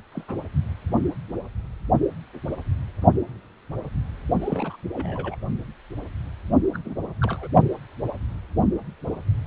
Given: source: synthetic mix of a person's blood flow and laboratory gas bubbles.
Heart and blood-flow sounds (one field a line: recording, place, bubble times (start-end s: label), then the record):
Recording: Doppler ultrasound of blood flow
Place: precordium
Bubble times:
0.12-0.24 s: bubbles
0.28-0.34 s: bubbles
4.39-4.76 s: bubbles
4.92-5.36 s: bubbles
6.73-6.78 s: bubbles
6.84-6.95 s: bubbles
7.21-7.47 s: bubbles
From the record:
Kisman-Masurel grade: 221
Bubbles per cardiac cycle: several, 3 to 8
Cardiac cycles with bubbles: 10 to 50%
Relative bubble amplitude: barely perceptible (0.100 to 0.250)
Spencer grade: 2 (many but less than half of the cardiac periods contain bubble signals, singularly or in groups)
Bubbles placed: only in the low amplitude regions of the cardiac cycle